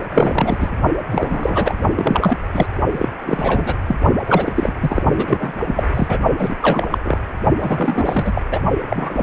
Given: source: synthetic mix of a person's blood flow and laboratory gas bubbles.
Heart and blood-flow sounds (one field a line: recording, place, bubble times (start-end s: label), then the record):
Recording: Doppler ultrasound of blood flow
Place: precordium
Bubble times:
0.13-0.58 s: bubbles
0.60-0.71 s: bubbles
1.11-1.80 s: bubbles
1.96-2.38 s: bubbles
2.54-2.66 s: bubbles
2.91-3.09 s: bubbles
3.26-3.75 s: bubbles
3.88-3.97 s: bubbles
4.26-4.52 s: bubbles
4.54-4.74 s: bubbles
4.81-5.02 s: bubbles
5.15-5.62 s: bubbles
5.67-5.88 s: bubbles
5.94-6.18 s: bubbles
6.38-6.56 s: bubbles
6.61-6.86 s: bubbles
6.90-6.98 s: bubbles
7.04-7.18 s: bubbles
7.59-8.42 s: bubbles
8.51-8.60 s: bubbles
8.90-9.23 s: bubbles
From the record:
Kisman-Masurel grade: 343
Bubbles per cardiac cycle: rolling drumbeat, 9 or more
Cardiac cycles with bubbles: 100%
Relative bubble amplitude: loud (0.450 to 0.775)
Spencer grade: 3 (all of the cardiac periods contain showers or single bubble signals, but not dominating or overriding the cardiac motion signals)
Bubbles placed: only in the low amplitude regions of the cardiac cycle